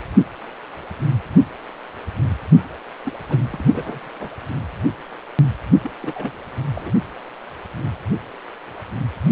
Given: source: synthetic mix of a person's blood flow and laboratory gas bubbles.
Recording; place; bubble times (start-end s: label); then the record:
Doppler ultrasound of blood flow; precordium
3.05-3.11 s: bubbles
3.29-3.38 s: bubbles
3.50-3.64 s: bubbles
3.73-4.00 s: bubbles
4.04-4.08 s: bubbles
4.20-4.31 s: bubbles
5.83-5.91 s: bubbles
6.02-6.32 s: bubbles
6.74-6.92 s: bubbles
From the record:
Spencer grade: 2 (many but less than half of the cardiac periods contain bubble signals, singularly or in groups); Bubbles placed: only in the low amplitude regions of the cardiac cycle